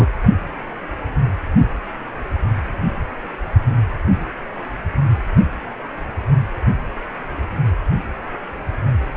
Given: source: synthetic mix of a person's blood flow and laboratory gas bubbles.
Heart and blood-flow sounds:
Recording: Doppler ultrasound of blood flow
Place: precordium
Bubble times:
0.00-0.07 s: bubbles
From the record:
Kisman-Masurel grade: 212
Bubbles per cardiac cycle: several, 3 to 8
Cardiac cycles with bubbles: 1 to 10%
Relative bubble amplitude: moderate (0.250 to 0.450)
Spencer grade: 1 (occasional bubble signal discernible with the cardiac motion signal, with majority of cardiac periods free of bubbles)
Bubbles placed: anywhere in the cardiac cycle

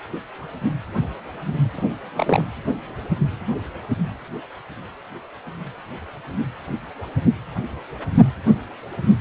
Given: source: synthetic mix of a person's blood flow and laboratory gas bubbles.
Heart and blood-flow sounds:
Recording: Doppler ultrasound of blood flow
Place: precordium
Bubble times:
1.77-1.85 s: bubbles
2.17-2.45 s: bubbles
From the record:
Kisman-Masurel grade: 222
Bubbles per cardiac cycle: several, 3 to 8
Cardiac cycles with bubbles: 10 to 50%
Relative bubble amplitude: moderate (0.250 to 0.450)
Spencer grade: 2 (many but less than half of the cardiac periods contain bubble signals, singularly or in groups)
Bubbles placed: anywhere in the cardiac cycle

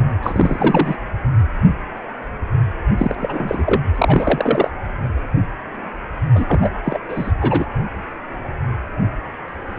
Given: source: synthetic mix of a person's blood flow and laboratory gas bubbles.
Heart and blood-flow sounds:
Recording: Doppler ultrasound of blood flow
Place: precordium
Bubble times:
0.23-0.95 s: bubbles
2.98-3.15 s: bubbles
3.20-3.81 s: bubbles
3.95-4.70 s: bubbles
6.35-6.71 s: bubbles
6.83-6.99 s: bubbles
7.08-7.32 s: bubbles
7.41-7.66 s: bubbles
From the record:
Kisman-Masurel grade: 333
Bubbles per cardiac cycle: rolling drumbeat, 9 or more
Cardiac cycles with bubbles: 50 to 99%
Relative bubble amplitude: loud (0.450 to 0.775)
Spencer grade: 3 (all of the cardiac periods contain showers or single bubble signals, but not dominating or overriding the cardiac motion signals)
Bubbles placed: anywhere in the cardiac cycle

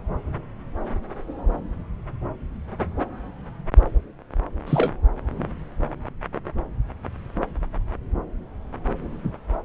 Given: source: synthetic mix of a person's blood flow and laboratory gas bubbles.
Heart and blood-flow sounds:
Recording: Doppler ultrasound of blood flow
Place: subclavian vein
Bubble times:
4.67-4.92 s: bubbles
From the record:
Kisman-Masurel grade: 113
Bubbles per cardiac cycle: 1 to 2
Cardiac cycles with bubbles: 1 to 10%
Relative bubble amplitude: loud (0.450 to 0.775)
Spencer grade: 1 (occasional bubble signal discernible with the cardiac motion signal, with majority of cardiac periods free of bubbles)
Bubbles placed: anywhere in the cardiac cycle

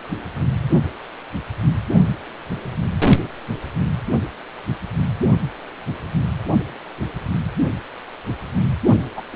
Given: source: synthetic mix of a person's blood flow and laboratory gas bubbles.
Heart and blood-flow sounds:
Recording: Doppler ultrasound of blood flow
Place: precordium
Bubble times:
9.16-9.22 s: bubbles
9.31-9.36 s: bubbles
From the record:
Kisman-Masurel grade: 213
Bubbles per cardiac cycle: several, 3 to 8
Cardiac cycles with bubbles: 1 to 10%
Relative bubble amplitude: loud (0.450 to 0.775)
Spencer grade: 1 (occasional bubble signal discernible with the cardiac motion signal, with majority of cardiac periods free of bubbles)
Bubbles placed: only in the low amplitude regions of the cardiac cycle

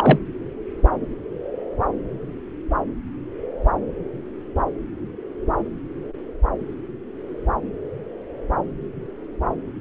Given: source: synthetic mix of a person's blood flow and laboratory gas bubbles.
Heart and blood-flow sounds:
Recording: Doppler ultrasound of blood flow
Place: subclavian vein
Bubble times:
0.00-0.19 s: bubbles
From the record:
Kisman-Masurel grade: 213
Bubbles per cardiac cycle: several, 3 to 8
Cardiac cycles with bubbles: 1 to 10%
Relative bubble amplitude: loud (0.450 to 0.775)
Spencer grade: 1 (occasional bubble signal discernible with the cardiac motion signal, with majority of cardiac periods free of bubbles)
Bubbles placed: anywhere in the cardiac cycle

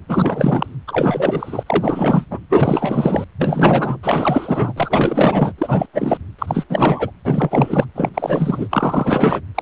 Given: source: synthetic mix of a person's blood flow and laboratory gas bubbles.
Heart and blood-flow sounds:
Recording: Doppler ultrasound of blood flow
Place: precordium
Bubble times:
0.08-0.77 s: bubbles
0.87-1.63 s: bubbles
1.66-2.25 s: bubbles
2.31-2.40 s: bubbles
2.50-3.25 s: bubbles
3.39-3.97 s: bubbles
4.03-4.73 s: bubbles
4.76-5.52 s: bubbles
5.58-5.86 s: bubbles
5.93-6.18 s: bubbles
6.38-6.64 s: bubbles
6.69-7.11 s: bubbles
7.24-7.86 s: bubbles
7.94-8.09 s: bubbles
8.13-9.40 s: bubbles
9.54-9.62 s: bubbles
From the record:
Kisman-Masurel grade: 444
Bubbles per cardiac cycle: continuous sound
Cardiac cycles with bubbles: 100%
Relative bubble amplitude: maximal (0.775 to 0.999)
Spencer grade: 4 (maximum detectable bubble signal sounding continuously throughout systole and diastole of every cardiac period, and overriding the amplitude of the normal cardiac signals)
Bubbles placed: anywhere in the cardiac cycle

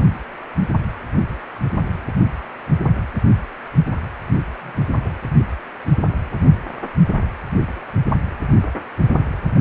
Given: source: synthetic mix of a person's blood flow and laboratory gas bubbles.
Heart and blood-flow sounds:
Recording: Doppler ultrasound of blood flow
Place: precordium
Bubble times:
4.62-4.86 s: bubbles
4.93-5.11 s: bubbles
From the record:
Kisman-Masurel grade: 111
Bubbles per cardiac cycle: 1 to 2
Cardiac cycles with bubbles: 1 to 10%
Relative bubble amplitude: barely perceptible (0.100 to 0.250)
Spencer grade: 1 (occasional bubble signal discernible with the cardiac motion signal, with majority of cardiac periods free of bubbles)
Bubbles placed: anywhere in the cardiac cycle

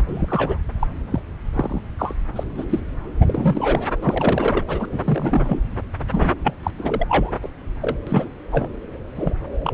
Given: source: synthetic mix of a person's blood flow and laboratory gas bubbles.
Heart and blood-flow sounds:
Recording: Doppler ultrasound of blood flow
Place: subclavian vein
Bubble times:
0.00-0.58 s: bubbles
0.79-0.87 s: bubbles
1.10-1.20 s: bubbles
1.53-1.82 s: bubbles
1.99-2.14 s: bubbles
2.35-2.44 s: bubbles
2.55-2.65 s: bubbles
2.69-2.79 s: bubbles
3.21-3.88 s: bubbles
4.02-4.63 s: bubbles
4.67-4.85 s: bubbles
4.92-5.60 s: bubbles
6.12-6.33 s: bubbles
6.43-6.54 s: bubbles
6.63-6.71 s: bubbles
6.78-7.04 s: bubbles
7.08-7.32 s: bubbles
7.42-7.48 s: bubbles
7.81-7.96 s: bubbles
8.06-8.29 s: bubbles
8.52-8.69 s: bubbles
9.15-9.33 s: bubbles
9.63-9.72 s: bubbles
From the record:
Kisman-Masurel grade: 243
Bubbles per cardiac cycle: several, 3 to 8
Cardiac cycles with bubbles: 100%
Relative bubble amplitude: loud (0.450 to 0.775)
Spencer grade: 3 (all of the cardiac periods contain showers or single bubble signals, but not dominating or overriding the cardiac motion signals)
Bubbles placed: anywhere in the cardiac cycle

